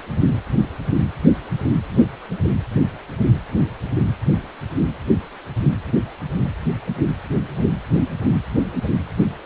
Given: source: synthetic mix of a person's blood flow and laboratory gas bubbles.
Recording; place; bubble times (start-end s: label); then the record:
Doppler ultrasound of blood flow; precordium
no bubbles
From the record:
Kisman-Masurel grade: 000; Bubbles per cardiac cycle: 0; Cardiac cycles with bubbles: 0%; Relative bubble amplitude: no bubbles discernible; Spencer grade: 0 (complete lack of bubble signals)